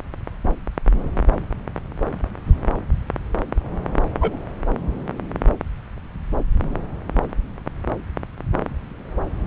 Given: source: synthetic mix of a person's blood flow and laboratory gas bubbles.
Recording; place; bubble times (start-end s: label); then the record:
Doppler ultrasound of blood flow; subclavian vein
4.21-4.37 s: bubbles
From the record:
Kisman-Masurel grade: 113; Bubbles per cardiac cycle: 1 to 2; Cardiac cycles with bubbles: 1 to 10%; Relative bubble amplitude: loud (0.450 to 0.775); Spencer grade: 1 (occasional bubble signal discernible with the cardiac motion signal, with majority of cardiac periods free of bubbles); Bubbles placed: anywhere in the cardiac cycle